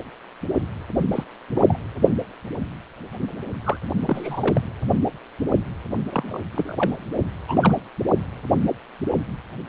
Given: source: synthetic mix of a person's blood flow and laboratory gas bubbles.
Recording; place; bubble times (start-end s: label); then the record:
Doppler ultrasound of blood flow; precordium
1.11-1.24 s: bubbles
1.54-1.77 s: bubbles
3.64-3.78 s: bubbles
3.99-4.61 s: bubbles
6.09-6.41 s: bubbles
6.54-6.95 s: bubbles
7.48-7.79 s: bubbles
From the record:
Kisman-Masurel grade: 232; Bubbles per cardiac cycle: several, 3 to 8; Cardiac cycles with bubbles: 50 to 99%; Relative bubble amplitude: moderate (0.250 to 0.450); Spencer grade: 3 (all of the cardiac periods contain showers or single bubble signals, but not dominating or overriding the cardiac motion signals); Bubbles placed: anywhere in the cardiac cycle